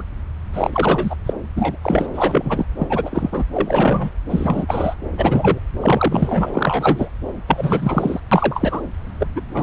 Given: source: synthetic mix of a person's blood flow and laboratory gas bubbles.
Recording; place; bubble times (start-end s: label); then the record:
Doppler ultrasound of blood flow; subclavian vein
0.00-0.03 s: bubbles
0.53-1.15 s: bubbles
1.25-1.33 s: bubbles
1.55-1.77 s: bubbles
1.81-2.07 s: bubbles
2.13-2.65 s: bubbles
2.79-3.44 s: bubbles
3.54-4.11 s: bubbles
4.30-4.95 s: bubbles
5.17-5.60 s: bubbles
5.80-6.52 s: bubbles
6.54-7.09 s: bubbles
7.48-8.20 s: bubbles
8.31-8.81 s: bubbles
9.20-9.26 s: bubbles
9.35-9.41 s: bubbles
9.54-9.63 s: bubbles
From the record:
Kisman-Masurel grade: 342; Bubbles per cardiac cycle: rolling drumbeat, 9 or more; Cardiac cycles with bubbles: 100%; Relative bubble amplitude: moderate (0.250 to 0.450); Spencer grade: 3 (all of the cardiac periods contain showers or single bubble signals, but not dominating or overriding the cardiac motion signals); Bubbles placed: anywhere in the cardiac cycle